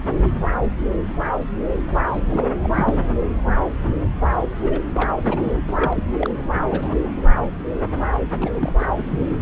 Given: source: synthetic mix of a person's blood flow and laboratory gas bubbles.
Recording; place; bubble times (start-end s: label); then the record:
Doppler ultrasound of blood flow; subclavian vein
2.12-2.48 s: bubbles
2.63-2.69 s: bubbles
2.73-2.98 s: bubbles
4.62-4.79 s: bubbles
4.95-5.10 s: bubbles
5.27-5.59 s: bubbles
5.67-6.03 s: bubbles
6.13-6.16 s: bubbles
6.19-6.30 s: bubbles
6.65-6.96 s: bubbles
8.40-8.72 s: bubbles
8.79-8.86 s: bubbles
8.95-9.42 s: bubbles
From the record:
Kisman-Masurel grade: 332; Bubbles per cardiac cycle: rolling drumbeat, 9 or more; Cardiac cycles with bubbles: 50 to 99%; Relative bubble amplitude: moderate (0.250 to 0.450); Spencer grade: 3 (all of the cardiac periods contain showers or single bubble signals, but not dominating or overriding the cardiac motion signals); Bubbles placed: anywhere in the cardiac cycle